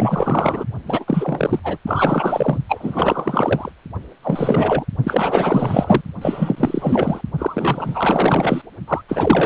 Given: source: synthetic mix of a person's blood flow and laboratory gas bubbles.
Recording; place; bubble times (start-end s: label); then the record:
Doppler ultrasound of blood flow; precordium
0.00-0.64 s: bubbles
0.86-1.59 s: bubbles
1.63-1.78 s: bubbles
1.86-2.58 s: bubbles
2.69-3.72 s: bubbles
4.22-4.85 s: bubbles
5.03-6.01 s: bubbles
6.21-7.21 s: bubbles
7.38-8.62 s: bubbles
8.88-9.02 s: bubbles
9.08-9.45 s: bubbles
From the record:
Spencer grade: 4 (maximum detectable bubble signal sounding continuously throughout systole and diastole of every cardiac period, and overriding the amplitude of the normal cardiac signals); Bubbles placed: only in the low amplitude regions of the cardiac cycle